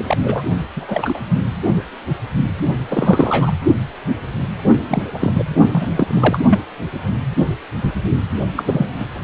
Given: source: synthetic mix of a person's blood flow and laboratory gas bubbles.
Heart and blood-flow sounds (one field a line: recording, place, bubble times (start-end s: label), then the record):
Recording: Doppler ultrasound of blood flow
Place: precordium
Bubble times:
0.00-0.16 s: bubbles
0.22-0.42 s: bubbles
0.76-1.21 s: bubbles
2.90-3.52 s: bubbles
4.88-5.03 s: bubbles
5.14-5.46 s: bubbles
5.72-6.39 s: bubbles
6.50-6.58 s: bubbles
8.56-8.63 s: bubbles
8.66-8.87 s: bubbles
8.99-9.06 s: bubbles
From the record:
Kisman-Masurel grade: 232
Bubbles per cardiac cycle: several, 3 to 8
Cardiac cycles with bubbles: 50 to 99%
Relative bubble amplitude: moderate (0.250 to 0.450)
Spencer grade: 3 (all of the cardiac periods contain showers or single bubble signals, but not dominating or overriding the cardiac motion signals)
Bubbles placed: only in the low amplitude regions of the cardiac cycle